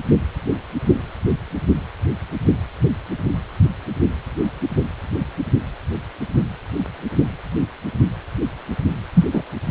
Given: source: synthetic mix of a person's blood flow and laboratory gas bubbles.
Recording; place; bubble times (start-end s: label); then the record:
Doppler ultrasound of blood flow; precordium
9.14-9.26 s: bubbles
9.32-9.43 s: bubbles
From the record:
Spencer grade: 1 (occasional bubble signal discernible with the cardiac motion signal, with majority of cardiac periods free of bubbles); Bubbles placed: only in the low amplitude regions of the cardiac cycle